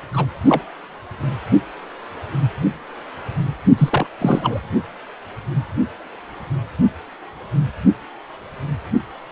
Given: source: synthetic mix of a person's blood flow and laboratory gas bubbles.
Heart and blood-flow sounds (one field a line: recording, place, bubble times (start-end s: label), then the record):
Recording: Doppler ultrasound of blood flow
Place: precordium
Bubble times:
0.13-0.26 s: bubbles
0.46-0.62 s: bubbles
3.78-4.07 s: bubbles
4.21-4.60 s: bubbles
From the record:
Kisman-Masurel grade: 223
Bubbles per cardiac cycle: several, 3 to 8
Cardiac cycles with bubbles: 10 to 50%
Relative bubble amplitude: loud (0.450 to 0.775)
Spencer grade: 2 (many but less than half of the cardiac periods contain bubble signals, singularly or in groups)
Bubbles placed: anywhere in the cardiac cycle